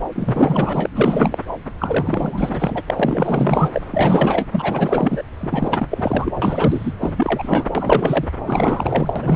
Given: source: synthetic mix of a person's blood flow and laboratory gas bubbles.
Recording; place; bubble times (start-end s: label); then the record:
Doppler ultrasound of blood flow; subclavian vein
0.15-0.89 s: bubbles
0.94-1.38 s: bubbles
1.78-2.81 s: bubbles
2.87-3.69 s: bubbles
3.73-3.81 s: bubbles
3.90-4.47 s: bubbles
4.51-5.23 s: bubbles
5.40-5.88 s: bubbles
5.90-6.32 s: bubbles
6.42-6.92 s: bubbles
7.01-7.72 s: bubbles
7.75-8.31 s: bubbles
8.46-9.36 s: bubbles
From the record:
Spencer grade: 4 (maximum detectable bubble signal sounding continuously throughout systole and diastole of every cardiac period, and overriding the amplitude of the normal cardiac signals); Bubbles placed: anywhere in the cardiac cycle